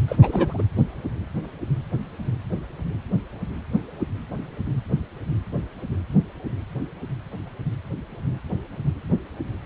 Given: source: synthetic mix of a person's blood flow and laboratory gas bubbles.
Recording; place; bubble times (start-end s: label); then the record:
Doppler ultrasound of blood flow; precordium
0.08-0.16 s: bubbles
0.22-0.62 s: bubbles
From the record:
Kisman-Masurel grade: 212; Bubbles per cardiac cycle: several, 3 to 8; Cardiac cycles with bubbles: 1 to 10%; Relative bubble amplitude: moderate (0.250 to 0.450); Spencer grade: 1 (occasional bubble signal discernible with the cardiac motion signal, with majority of cardiac periods free of bubbles); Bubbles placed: anywhere in the cardiac cycle